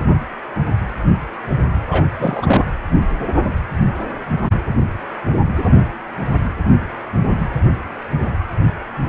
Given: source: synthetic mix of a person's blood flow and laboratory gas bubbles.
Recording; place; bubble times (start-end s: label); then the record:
Doppler ultrasound of blood flow; precordium
1.89-2.04 s: bubbles
2.19-2.65 s: bubbles
From the record:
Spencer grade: 1 (occasional bubble signal discernible with the cardiac motion signal, with majority of cardiac periods free of bubbles); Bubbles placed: anywhere in the cardiac cycle